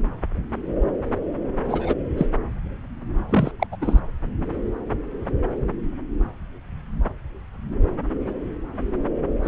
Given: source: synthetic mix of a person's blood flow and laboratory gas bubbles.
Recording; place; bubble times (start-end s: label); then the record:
Doppler ultrasound of blood flow; subclavian vein
1.64-1.94 s: bubbles
2.17-2.27 s: bubbles
3.29-3.52 s: bubbles
3.60-3.67 s: bubbles
3.71-3.76 s: bubbles
3.81-3.99 s: bubbles
9.43-9.48 s: bubbles
From the record:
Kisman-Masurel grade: 222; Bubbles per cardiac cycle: several, 3 to 8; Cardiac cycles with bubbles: 10 to 50%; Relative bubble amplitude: moderate (0.250 to 0.450); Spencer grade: 2 (many but less than half of the cardiac periods contain bubble signals, singularly or in groups); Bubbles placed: anywhere in the cardiac cycle